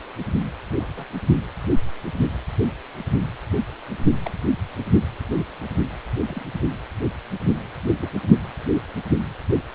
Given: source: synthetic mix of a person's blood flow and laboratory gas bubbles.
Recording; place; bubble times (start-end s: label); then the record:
Doppler ultrasound of blood flow; precordium
0.77-0.92 s: bubbles
0.96-1.04 s: bubbles
4.25-4.32 s: bubbles
6.28-6.44 s: bubbles
7.42-7.52 s: bubbles
7.97-8.09 s: bubbles
8.94-9.00 s: bubbles
9.18-9.25 s: bubbles
From the record:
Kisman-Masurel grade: 121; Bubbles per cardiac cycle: 1 to 2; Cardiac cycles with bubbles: 10 to 50%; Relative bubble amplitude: barely perceptible (0.100 to 0.250); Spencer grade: 2 (many but less than half of the cardiac periods contain bubble signals, singularly or in groups); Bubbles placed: only in the low amplitude regions of the cardiac cycle